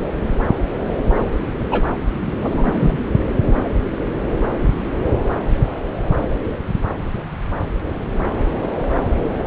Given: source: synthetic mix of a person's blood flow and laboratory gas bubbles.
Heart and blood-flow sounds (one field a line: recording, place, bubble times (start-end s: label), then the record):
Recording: Doppler ultrasound of blood flow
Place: subclavian vein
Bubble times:
1.70-1.84 s: bubbles
2.22-2.31 s: bubbles
2.42-2.97 s: bubbles
From the record:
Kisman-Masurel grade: 222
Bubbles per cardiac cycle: several, 3 to 8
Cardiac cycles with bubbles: 10 to 50%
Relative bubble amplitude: moderate (0.250 to 0.450)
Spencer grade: 2 (many but less than half of the cardiac periods contain bubble signals, singularly or in groups)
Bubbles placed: anywhere in the cardiac cycle